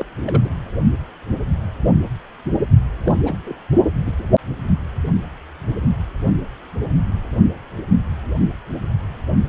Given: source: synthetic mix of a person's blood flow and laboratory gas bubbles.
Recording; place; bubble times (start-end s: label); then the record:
Doppler ultrasound of blood flow; precordium
0.00-0.05 s: bubbles
0.17-0.22 s: bubbles
0.27-0.50 s: bubbles
3.04-3.17 s: bubbles
3.25-3.38 s: bubbles
3.44-3.56 s: bubbles
4.06-4.12 s: bubbles
4.19-4.24 s: bubbles
From the record:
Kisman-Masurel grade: 221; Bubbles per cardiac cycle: several, 3 to 8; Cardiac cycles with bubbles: 10 to 50%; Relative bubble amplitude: barely perceptible (0.100 to 0.250); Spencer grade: 2 (many but less than half of the cardiac periods contain bubble signals, singularly or in groups); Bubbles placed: only in the low amplitude regions of the cardiac cycle